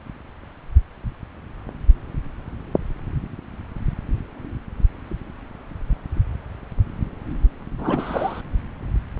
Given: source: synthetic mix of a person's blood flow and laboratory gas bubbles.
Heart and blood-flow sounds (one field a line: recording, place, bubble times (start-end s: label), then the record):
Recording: Doppler ultrasound of blood flow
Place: subclavian vein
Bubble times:
7.78-8.41 s: bubbles
From the record:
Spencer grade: 1 (occasional bubble signal discernible with the cardiac motion signal, with majority of cardiac periods free of bubbles)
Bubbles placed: anywhere in the cardiac cycle